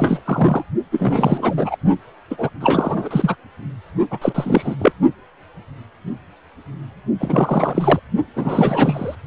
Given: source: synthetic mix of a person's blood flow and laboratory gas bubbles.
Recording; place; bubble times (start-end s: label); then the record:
Doppler ultrasound of blood flow; precordium
0.00-0.21 s: bubbles
0.25-0.64 s: bubbles
0.92-1.77 s: bubbles
2.30-2.50 s: bubbles
2.60-3.35 s: bubbles
4.01-4.06 s: bubbles
4.10-4.18 s: bubbles
4.21-4.75 s: bubbles
4.78-4.92 s: bubbles
7.19-8.00 s: bubbles
8.35-9.16 s: bubbles
From the record:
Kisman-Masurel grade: 333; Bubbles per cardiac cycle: rolling drumbeat, 9 or more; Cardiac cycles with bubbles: 50 to 99%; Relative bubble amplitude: loud (0.450 to 0.775); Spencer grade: 3 (all of the cardiac periods contain showers or single bubble signals, but not dominating or overriding the cardiac motion signals); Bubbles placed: only in the low amplitude regions of the cardiac cycle